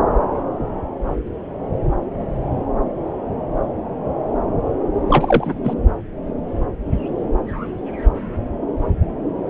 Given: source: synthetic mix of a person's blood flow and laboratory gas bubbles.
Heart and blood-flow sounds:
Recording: Doppler ultrasound of blood flow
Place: subclavian vein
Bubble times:
5.08-5.59 s: bubbles
5.63-5.73 s: bubbles
From the record:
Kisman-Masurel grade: 213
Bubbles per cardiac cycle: several, 3 to 8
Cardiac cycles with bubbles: 1 to 10%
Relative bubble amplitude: loud (0.450 to 0.775)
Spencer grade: 1 (occasional bubble signal discernible with the cardiac motion signal, with majority of cardiac periods free of bubbles)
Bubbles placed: anywhere in the cardiac cycle

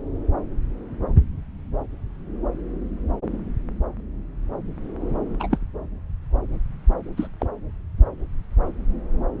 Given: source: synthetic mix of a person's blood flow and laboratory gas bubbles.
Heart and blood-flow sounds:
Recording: Doppler ultrasound of blood flow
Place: subclavian vein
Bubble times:
5.39-5.58 s: bubbles
7.17-7.27 s: bubbles
7.39-7.47 s: bubbles
From the record:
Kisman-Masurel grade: 122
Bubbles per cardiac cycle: 1 to 2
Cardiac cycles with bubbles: 10 to 50%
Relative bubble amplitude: moderate (0.250 to 0.450)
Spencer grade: 2 (many but less than half of the cardiac periods contain bubble signals, singularly or in groups)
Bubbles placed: anywhere in the cardiac cycle

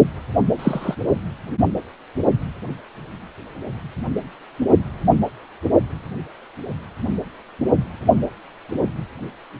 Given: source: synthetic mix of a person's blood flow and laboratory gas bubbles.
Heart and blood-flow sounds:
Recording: Doppler ultrasound of blood flow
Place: precordium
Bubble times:
0.59-0.95 s: bubbles
From the record:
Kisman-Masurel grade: 113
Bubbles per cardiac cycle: 1 to 2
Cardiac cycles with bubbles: 1 to 10%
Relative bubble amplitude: loud (0.450 to 0.775)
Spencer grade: 1 (occasional bubble signal discernible with the cardiac motion signal, with majority of cardiac periods free of bubbles)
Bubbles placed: only in the low amplitude regions of the cardiac cycle

